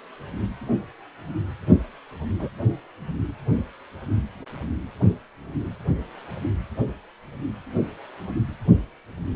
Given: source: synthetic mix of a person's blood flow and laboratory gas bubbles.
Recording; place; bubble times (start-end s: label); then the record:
Doppler ultrasound of blood flow; precordium
2.39-2.48 s: bubbles
From the record:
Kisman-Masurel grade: 112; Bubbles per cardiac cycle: 1 to 2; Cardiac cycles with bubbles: 1 to 10%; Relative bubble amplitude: moderate (0.250 to 0.450); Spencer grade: 1 (occasional bubble signal discernible with the cardiac motion signal, with majority of cardiac periods free of bubbles); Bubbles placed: anywhere in the cardiac cycle